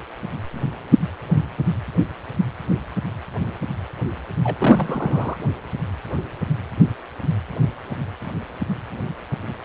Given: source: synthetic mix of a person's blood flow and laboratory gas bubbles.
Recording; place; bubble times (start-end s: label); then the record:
Doppler ultrasound of blood flow; precordium
4.43-4.55 s: bubbles
4.58-5.37 s: bubbles
From the record:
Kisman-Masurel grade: 212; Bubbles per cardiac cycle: several, 3 to 8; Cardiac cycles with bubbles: 1 to 10%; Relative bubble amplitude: moderate (0.250 to 0.450); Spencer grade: 1 (occasional bubble signal discernible with the cardiac motion signal, with majority of cardiac periods free of bubbles); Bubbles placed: anywhere in the cardiac cycle